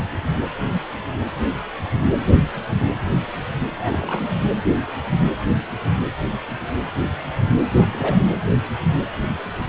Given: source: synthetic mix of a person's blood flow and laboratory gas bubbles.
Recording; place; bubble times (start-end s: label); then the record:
Doppler ultrasound of blood flow; precordium
3.80-4.29 s: bubbles
7.74-7.89 s: bubbles
7.93-8.26 s: bubbles
8.34-8.38 s: bubbles
From the record:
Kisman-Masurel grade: 211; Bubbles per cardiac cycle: several, 3 to 8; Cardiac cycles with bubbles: 1 to 10%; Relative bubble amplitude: barely perceptible (0.100 to 0.250); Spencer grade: 1 (occasional bubble signal discernible with the cardiac motion signal, with majority of cardiac periods free of bubbles); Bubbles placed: anywhere in the cardiac cycle